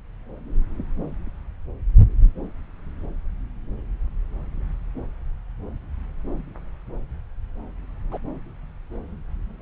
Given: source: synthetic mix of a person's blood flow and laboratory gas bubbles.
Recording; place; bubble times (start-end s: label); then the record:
Doppler ultrasound of blood flow; subclavian vein
8.12-8.19 s: bubbles
From the record:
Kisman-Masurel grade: 112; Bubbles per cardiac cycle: 1 to 2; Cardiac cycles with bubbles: 1 to 10%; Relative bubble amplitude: moderate (0.250 to 0.450); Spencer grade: 1 (occasional bubble signal discernible with the cardiac motion signal, with majority of cardiac periods free of bubbles); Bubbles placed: anywhere in the cardiac cycle